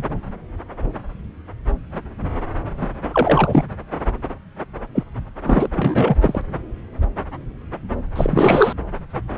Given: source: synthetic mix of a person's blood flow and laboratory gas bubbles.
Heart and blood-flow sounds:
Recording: Doppler ultrasound of blood flow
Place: subclavian vein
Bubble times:
2.81-2.87 s: bubbles
3.13-3.64 s: bubbles
4.94-5.03 s: bubbles
5.44-5.69 s: bubbles
5.74-6.16 s: bubbles
6.21-6.42 s: bubbles
8.16-8.73 s: bubbles
From the record:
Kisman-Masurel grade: 223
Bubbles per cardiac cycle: several, 3 to 8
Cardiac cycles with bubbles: 10 to 50%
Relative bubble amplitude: loud (0.450 to 0.775)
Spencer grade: 2 (many but less than half of the cardiac periods contain bubble signals, singularly or in groups)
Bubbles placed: anywhere in the cardiac cycle

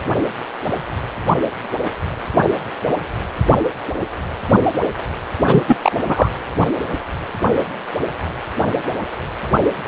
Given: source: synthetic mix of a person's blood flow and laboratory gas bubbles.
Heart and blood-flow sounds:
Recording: Doppler ultrasound of blood flow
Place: precordium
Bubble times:
5.46-5.63 s: bubbles
5.67-5.77 s: bubbles
5.82-5.93 s: bubbles
6.06-6.29 s: bubbles
From the record:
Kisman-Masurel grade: 223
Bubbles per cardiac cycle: several, 3 to 8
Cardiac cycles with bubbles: 10 to 50%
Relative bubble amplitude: loud (0.450 to 0.775)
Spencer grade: 2 (many but less than half of the cardiac periods contain bubble signals, singularly or in groups)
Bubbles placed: anywhere in the cardiac cycle

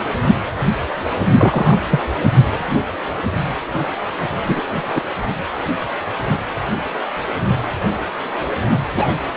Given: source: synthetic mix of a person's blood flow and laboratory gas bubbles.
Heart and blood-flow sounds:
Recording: Doppler ultrasound of blood flow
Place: precordium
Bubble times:
1.34-1.78 s: bubbles
1.91-2.07 s: bubbles
4.44-4.61 s: bubbles
4.94-5.01 s: bubbles
8.96-9.14 s: bubbles
From the record:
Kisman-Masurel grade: 123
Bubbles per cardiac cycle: 1 to 2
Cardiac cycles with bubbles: 10 to 50%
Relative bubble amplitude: loud (0.450 to 0.775)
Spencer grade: 2 (many but less than half of the cardiac periods contain bubble signals, singularly or in groups)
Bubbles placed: anywhere in the cardiac cycle

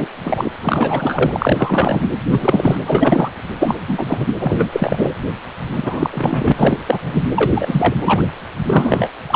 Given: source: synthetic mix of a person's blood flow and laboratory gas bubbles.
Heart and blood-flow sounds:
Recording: Doppler ultrasound of blood flow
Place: precordium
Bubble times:
0.00-0.08 s: bubbles
0.24-0.49 s: bubbles
0.62-2.08 s: bubbles
2.31-2.77 s: bubbles
2.85-3.31 s: bubbles
3.58-4.24 s: bubbles
4.39-4.69 s: bubbles
4.72-5.13 s: bubbles
5.72-6.52 s: bubbles
6.57-6.99 s: bubbles
7.02-7.24 s: bubbles
7.36-7.95 s: bubbles
8.01-8.22 s: bubbles
8.66-9.08 s: bubbles
9.28-9.35 s: bubbles
From the record:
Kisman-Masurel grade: 343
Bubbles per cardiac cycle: rolling drumbeat, 9 or more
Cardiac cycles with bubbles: 100%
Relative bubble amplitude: loud (0.450 to 0.775)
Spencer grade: 3 (all of the cardiac periods contain showers or single bubble signals, but not dominating or overriding the cardiac motion signals)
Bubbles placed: anywhere in the cardiac cycle

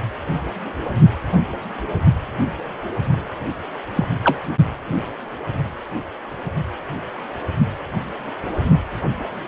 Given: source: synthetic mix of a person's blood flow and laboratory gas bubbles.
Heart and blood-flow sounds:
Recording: Doppler ultrasound of blood flow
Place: precordium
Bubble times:
3.95-4.08 s: bubbles
4.24-4.39 s: bubbles
From the record:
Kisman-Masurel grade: 112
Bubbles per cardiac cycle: 1 to 2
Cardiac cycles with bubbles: 1 to 10%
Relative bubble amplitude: moderate (0.250 to 0.450)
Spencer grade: 1 (occasional bubble signal discernible with the cardiac motion signal, with majority of cardiac periods free of bubbles)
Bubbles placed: only in the low amplitude regions of the cardiac cycle

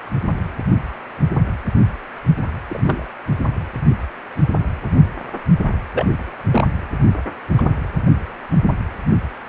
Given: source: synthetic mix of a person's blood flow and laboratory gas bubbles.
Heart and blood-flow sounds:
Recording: Doppler ultrasound of blood flow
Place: precordium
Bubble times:
2.67-3.06 s: bubbles
5.94-6.06 s: bubbles
6.50-6.64 s: bubbles
7.58-7.62 s: bubbles
From the record:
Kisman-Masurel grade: 122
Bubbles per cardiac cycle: 1 to 2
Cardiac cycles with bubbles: 10 to 50%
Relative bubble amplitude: moderate (0.250 to 0.450)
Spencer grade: 2 (many but less than half of the cardiac periods contain bubble signals, singularly or in groups)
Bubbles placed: anywhere in the cardiac cycle

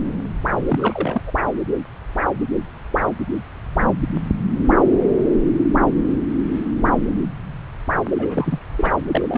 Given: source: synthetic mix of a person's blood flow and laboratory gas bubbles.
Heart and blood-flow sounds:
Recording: Doppler ultrasound of blood flow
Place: subclavian vein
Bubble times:
0.68-1.23 s: bubbles
1.26-1.31 s: bubbles
8.12-8.59 s: bubbles
8.77-8.90 s: bubbles
9.11-9.38 s: bubbles
From the record:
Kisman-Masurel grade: 222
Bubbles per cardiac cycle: several, 3 to 8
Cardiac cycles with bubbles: 10 to 50%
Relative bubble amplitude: moderate (0.250 to 0.450)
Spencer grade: 2 (many but less than half of the cardiac periods contain bubble signals, singularly or in groups)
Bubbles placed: anywhere in the cardiac cycle

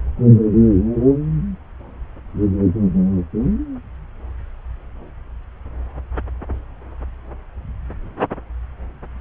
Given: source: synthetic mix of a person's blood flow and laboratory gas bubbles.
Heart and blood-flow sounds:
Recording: Doppler ultrasound of blood flow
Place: subclavian vein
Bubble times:
no bubbles
From the record:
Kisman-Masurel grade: 000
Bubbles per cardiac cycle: 0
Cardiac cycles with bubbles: 0%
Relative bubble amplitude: no bubbles discernible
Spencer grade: 0 (complete lack of bubble signals)

